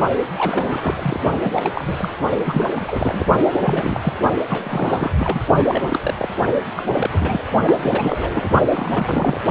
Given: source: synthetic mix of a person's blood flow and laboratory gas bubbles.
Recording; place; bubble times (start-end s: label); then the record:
Doppler ultrasound of blood flow; precordium
0.37-1.20 s: bubbles
1.42-1.70 s: bubbles
1.74-2.15 s: bubbles
2.45-3.25 s: bubbles
3.60-4.13 s: bubbles
4.47-5.12 s: bubbles
5.17-5.41 s: bubbles
5.67-6.14 s: bubbles
6.19-6.29 s: bubbles
6.75-6.92 s: bubbles
6.95-7.45 s: bubbles
7.64-8.50 s: bubbles
8.71-9.41 s: bubbles
From the record:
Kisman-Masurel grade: 342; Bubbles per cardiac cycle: rolling drumbeat, 9 or more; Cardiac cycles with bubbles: 100%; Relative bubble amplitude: moderate (0.250 to 0.450); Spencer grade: 3 (all of the cardiac periods contain showers or single bubble signals, but not dominating or overriding the cardiac motion signals); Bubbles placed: only in the low amplitude regions of the cardiac cycle